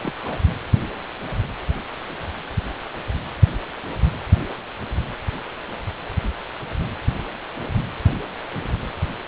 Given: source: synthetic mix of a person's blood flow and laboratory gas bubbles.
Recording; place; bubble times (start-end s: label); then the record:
Doppler ultrasound of blood flow; precordium
0.03-0.14 s: bubbles
0.24-0.39 s: bubbles
From the record:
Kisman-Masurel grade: 211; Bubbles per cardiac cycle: several, 3 to 8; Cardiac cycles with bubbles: 1 to 10%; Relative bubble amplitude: barely perceptible (0.100 to 0.250); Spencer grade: 1 (occasional bubble signal discernible with the cardiac motion signal, with majority of cardiac periods free of bubbles); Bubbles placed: anywhere in the cardiac cycle